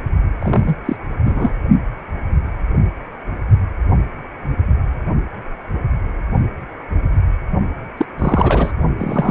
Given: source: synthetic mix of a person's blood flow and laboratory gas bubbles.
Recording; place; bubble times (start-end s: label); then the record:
Doppler ultrasound of blood flow; precordium
0.40-0.76 s: bubbles
0.85-0.97 s: bubbles
1.25-1.52 s: bubbles
7.97-8.05 s: bubbles
8.18-8.72 s: bubbles
8.97-9.31 s: bubbles
From the record:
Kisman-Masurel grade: 223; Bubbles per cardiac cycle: several, 3 to 8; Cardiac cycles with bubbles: 10 to 50%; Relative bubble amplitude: loud (0.450 to 0.775); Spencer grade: 2 (many but less than half of the cardiac periods contain bubble signals, singularly or in groups); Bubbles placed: only in the low amplitude regions of the cardiac cycle